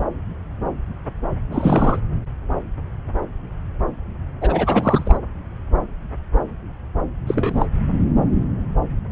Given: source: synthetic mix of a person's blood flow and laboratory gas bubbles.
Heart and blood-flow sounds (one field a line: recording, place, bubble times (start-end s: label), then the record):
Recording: Doppler ultrasound of blood flow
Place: subclavian vein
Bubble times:
1.51-2.00 s: bubbles
4.41-5.19 s: bubbles
7.27-7.66 s: bubbles
From the record:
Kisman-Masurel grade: 222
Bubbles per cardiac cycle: several, 3 to 8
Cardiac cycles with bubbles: 10 to 50%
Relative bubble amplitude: moderate (0.250 to 0.450)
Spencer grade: 2 (many but less than half of the cardiac periods contain bubble signals, singularly or in groups)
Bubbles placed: anywhere in the cardiac cycle